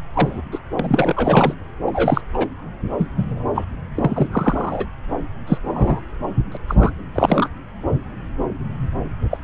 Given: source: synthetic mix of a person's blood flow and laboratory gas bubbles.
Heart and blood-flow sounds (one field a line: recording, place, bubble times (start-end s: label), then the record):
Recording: Doppler ultrasound of blood flow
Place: subclavian vein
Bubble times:
0.13-0.41 s: bubbles
0.52-0.59 s: bubbles
0.79-1.54 s: bubbles
1.86-2.21 s: bubbles
2.34-2.47 s: bubbles
2.98-3.07 s: bubbles
3.17-3.44 s: bubbles
3.55-3.65 s: bubbles
3.95-4.28 s: bubbles
4.32-4.87 s: bubbles
5.47-5.58 s: bubbles
5.65-6.01 s: bubbles
6.52-6.57 s: bubbles
6.68-6.75 s: bubbles
6.78-6.91 s: bubbles
7.15-7.49 s: bubbles
9.30-9.38 s: bubbles
From the record:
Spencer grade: 3 (all of the cardiac periods contain showers or single bubble signals, but not dominating or overriding the cardiac motion signals)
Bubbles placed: anywhere in the cardiac cycle